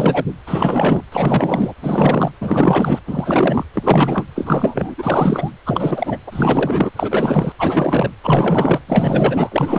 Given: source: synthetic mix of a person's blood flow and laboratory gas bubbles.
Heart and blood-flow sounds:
Doppler ultrasound of blood flow; precordium
0.00-0.26 s: bubbles
0.47-1.03 s: bubbles
1.12-1.73 s: bubbles
1.81-2.31 s: bubbles
2.40-2.99 s: bubbles
3.06-3.65 s: bubbles
3.73-4.25 s: bubbles
4.35-4.95 s: bubbles
4.97-5.51 s: bubbles
5.66-6.17 s: bubbles
6.26-6.90 s: bubbles
6.96-7.52 s: bubbles
7.58-8.11 s: bubbles
8.23-8.79 s: bubbles
8.87-9.78 s: bubbles
From the record:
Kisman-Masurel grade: 444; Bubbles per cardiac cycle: continuous sound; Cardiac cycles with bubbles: 100%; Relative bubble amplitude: maximal (0.775 to 0.999); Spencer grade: 4 (maximum detectable bubble signal sounding continuously throughout systole and diastole of every cardiac period, and overriding the amplitude of the normal cardiac signals); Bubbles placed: anywhere in the cardiac cycle

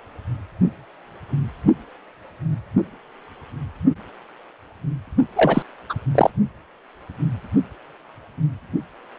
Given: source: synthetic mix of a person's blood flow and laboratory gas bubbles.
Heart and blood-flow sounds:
Doppler ultrasound of blood flow; precordium
5.36-5.62 s: bubbles
5.89-5.94 s: bubbles
6.15-6.30 s: bubbles
From the record:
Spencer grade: 2 (many but less than half of the cardiac periods contain bubble signals, singularly or in groups); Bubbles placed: only in the low amplitude regions of the cardiac cycle

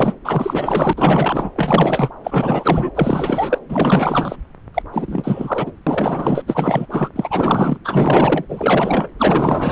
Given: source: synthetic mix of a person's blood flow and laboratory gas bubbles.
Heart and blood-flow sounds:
Doppler ultrasound of blood flow; subclavian vein
0.00-0.17 s: bubbles
0.24-0.93 s: bubbles
0.96-1.50 s: bubbles
1.55-2.10 s: bubbles
2.24-2.90 s: bubbles
2.95-3.58 s: bubbles
3.69-4.36 s: bubbles
4.74-4.83 s: bubbles
4.92-5.71 s: bubbles
5.87-6.44 s: bubbles
6.47-6.86 s: bubbles
6.90-7.08 s: bubbles
7.16-7.78 s: bubbles
7.84-8.45 s: bubbles
8.48-9.08 s: bubbles
9.19-9.72 s: bubbles
From the record:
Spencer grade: 4 (maximum detectable bubble signal sounding continuously throughout systole and diastole of every cardiac period, and overriding the amplitude of the normal cardiac signals); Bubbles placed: anywhere in the cardiac cycle

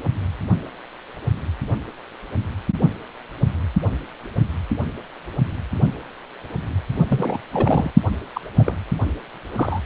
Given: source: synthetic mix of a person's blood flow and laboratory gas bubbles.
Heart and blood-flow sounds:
Doppler ultrasound of blood flow; precordium
7.08-7.42 s: bubbles
7.51-7.91 s: bubbles
8.34-8.41 s: bubbles
8.59-8.74 s: bubbles
9.53-9.79 s: bubbles
From the record:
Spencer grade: 2 (many but less than half of the cardiac periods contain bubble signals, singularly or in groups); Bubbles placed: only in the low amplitude regions of the cardiac cycle

